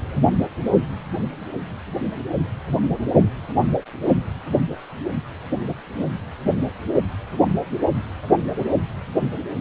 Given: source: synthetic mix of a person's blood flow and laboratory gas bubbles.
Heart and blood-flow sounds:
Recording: Doppler ultrasound of blood flow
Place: precordium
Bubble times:
no bubbles
From the record:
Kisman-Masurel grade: 000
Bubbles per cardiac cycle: 0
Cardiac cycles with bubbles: 0%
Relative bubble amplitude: no bubbles discernible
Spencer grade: 0 (complete lack of bubble signals)

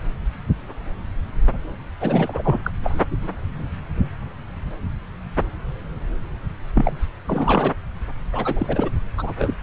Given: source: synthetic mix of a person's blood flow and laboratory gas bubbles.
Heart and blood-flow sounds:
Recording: Doppler ultrasound of blood flow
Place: subclavian vein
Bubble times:
2.00-2.59 s: bubbles
2.64-2.71 s: bubbles
2.83-3.01 s: bubbles
3.10-3.17 s: bubbles
6.75-6.96 s: bubbles
7.27-7.74 s: bubbles
8.31-8.89 s: bubbles
9.17-9.33 s: bubbles
9.38-9.54 s: bubbles
From the record:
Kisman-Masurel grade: 332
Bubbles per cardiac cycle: rolling drumbeat, 9 or more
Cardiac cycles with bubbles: 50 to 99%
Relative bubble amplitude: moderate (0.250 to 0.450)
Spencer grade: 3 (all of the cardiac periods contain showers or single bubble signals, but not dominating or overriding the cardiac motion signals)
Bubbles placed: anywhere in the cardiac cycle

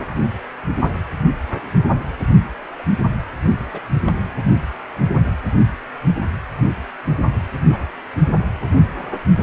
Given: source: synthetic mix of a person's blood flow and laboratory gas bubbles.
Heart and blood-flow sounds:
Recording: Doppler ultrasound of blood flow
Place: precordium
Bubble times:
2.78-2.83 s: bubbles
3.73-3.79 s: bubbles
4.05-4.11 s: bubbles
7.68-7.87 s: bubbles
From the record:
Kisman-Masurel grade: 121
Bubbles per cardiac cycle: 1 to 2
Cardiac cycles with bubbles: 10 to 50%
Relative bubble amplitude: barely perceptible (0.100 to 0.250)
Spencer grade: 2 (many but less than half of the cardiac periods contain bubble signals, singularly or in groups)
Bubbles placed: anywhere in the cardiac cycle

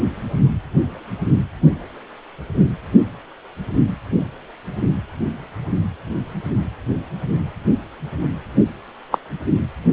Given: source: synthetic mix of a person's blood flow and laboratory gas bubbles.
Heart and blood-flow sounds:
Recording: Doppler ultrasound of blood flow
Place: precordium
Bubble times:
9.11-9.18 s: bubbles
From the record:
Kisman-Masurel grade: 123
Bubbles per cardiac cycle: 1 to 2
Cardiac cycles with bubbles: 10 to 50%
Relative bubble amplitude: loud (0.450 to 0.775)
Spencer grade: 2 (many but less than half of the cardiac periods contain bubble signals, singularly or in groups)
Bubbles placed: anywhere in the cardiac cycle

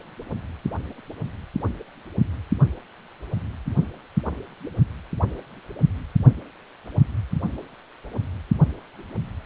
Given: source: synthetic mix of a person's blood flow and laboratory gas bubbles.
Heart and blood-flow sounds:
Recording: Doppler ultrasound of blood flow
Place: precordium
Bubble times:
no bubbles
From the record:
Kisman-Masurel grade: 000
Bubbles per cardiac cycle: 0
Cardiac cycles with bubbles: 0%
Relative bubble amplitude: no bubbles discernible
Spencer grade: 0 (complete lack of bubble signals)

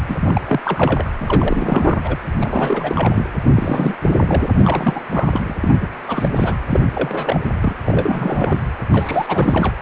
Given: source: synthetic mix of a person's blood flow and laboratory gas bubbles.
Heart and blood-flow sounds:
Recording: Doppler ultrasound of blood flow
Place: precordium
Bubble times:
0.07-0.44 s: bubbles
0.47-0.60 s: bubbles
0.64-1.10 s: bubbles
1.21-2.01 s: bubbles
2.04-2.16 s: bubbles
2.40-3.25 s: bubbles
3.55-3.96 s: bubbles
4.03-4.49 s: bubbles
4.53-5.01 s: bubbles
5.09-5.57 s: bubbles
5.62-5.74 s: bubbles
5.80-5.88 s: bubbles
6.07-6.29 s: bubbles
6.36-6.55 s: bubbles
6.69-6.80 s: bubbles
6.93-7.45 s: bubbles
7.61-7.74 s: bubbles
7.84-8.61 s: bubbles
8.90-9.73 s: bubbles
From the record:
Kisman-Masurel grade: 342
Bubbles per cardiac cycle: rolling drumbeat, 9 or more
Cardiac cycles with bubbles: 100%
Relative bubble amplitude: moderate (0.250 to 0.450)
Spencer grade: 3 (all of the cardiac periods contain showers or single bubble signals, but not dominating or overriding the cardiac motion signals)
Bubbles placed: anywhere in the cardiac cycle

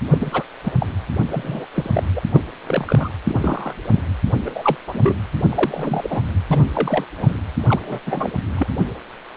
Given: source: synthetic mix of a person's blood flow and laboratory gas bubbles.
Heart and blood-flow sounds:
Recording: Doppler ultrasound of blood flow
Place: precordium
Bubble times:
0.11-0.18 s: bubbles
0.21-0.43 s: bubbles
0.64-0.72 s: bubbles
0.79-0.86 s: bubbles
1.31-1.67 s: bubbles
1.74-1.90 s: bubbles
1.93-2.04 s: bubbles
2.14-2.19 s: bubbles
2.33-2.43 s: bubbles
2.67-3.08 s: bubbles
3.27-3.74 s: bubbles
3.90-4.03 s: bubbles
4.45-4.50 s: bubbles
4.54-4.77 s: bubbles
4.87-5.15 s: bubbles
5.49-6.22 s: bubbles
6.51-6.70 s: bubbles
6.73-7.05 s: bubbles
7.17-7.37 s: bubbles
7.67-8.01 s: bubbles
8.06-8.32 s: bubbles
8.55-8.67 s: bubbles
From the record:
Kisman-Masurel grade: 232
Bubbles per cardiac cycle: several, 3 to 8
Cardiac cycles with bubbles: 50 to 99%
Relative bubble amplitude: moderate (0.250 to 0.450)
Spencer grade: 3 (all of the cardiac periods contain showers or single bubble signals, but not dominating or overriding the cardiac motion signals)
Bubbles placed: anywhere in the cardiac cycle

